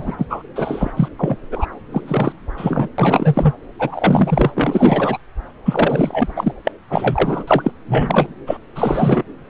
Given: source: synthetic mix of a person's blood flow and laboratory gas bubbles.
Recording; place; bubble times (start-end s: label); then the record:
Doppler ultrasound of blood flow; subclavian vein
0.00-0.26 s: bubbles
0.30-0.43 s: bubbles
0.55-0.91 s: bubbles
0.96-1.08 s: bubbles
1.19-1.36 s: bubbles
1.52-1.66 s: bubbles
1.92-2.33 s: bubbles
2.57-2.89 s: bubbles
2.98-3.53 s: bubbles
3.79-4.51 s: bubbles
4.55-5.17 s: bubbles
5.65-6.53 s: bubbles
6.65-6.72 s: bubbles
6.90-7.44 s: bubbles
7.47-7.71 s: bubbles
7.88-8.29 s: bubbles
8.46-8.57 s: bubbles
8.75-9.23 s: bubbles
From the record:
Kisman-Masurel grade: 343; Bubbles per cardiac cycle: rolling drumbeat, 9 or more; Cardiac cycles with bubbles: 100%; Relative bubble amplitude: loud (0.450 to 0.775); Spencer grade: 3 (all of the cardiac periods contain showers or single bubble signals, but not dominating or overriding the cardiac motion signals); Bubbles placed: anywhere in the cardiac cycle